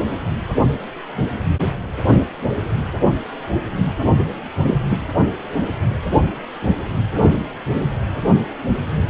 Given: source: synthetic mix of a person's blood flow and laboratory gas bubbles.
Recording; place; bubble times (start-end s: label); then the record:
Doppler ultrasound of blood flow; precordium
4.62-4.77 s: bubbles
4.90-4.98 s: bubbles
From the record:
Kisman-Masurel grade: 113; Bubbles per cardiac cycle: 1 to 2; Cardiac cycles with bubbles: 1 to 10%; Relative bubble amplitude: loud (0.450 to 0.775); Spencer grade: 1 (occasional bubble signal discernible with the cardiac motion signal, with majority of cardiac periods free of bubbles); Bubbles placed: anywhere in the cardiac cycle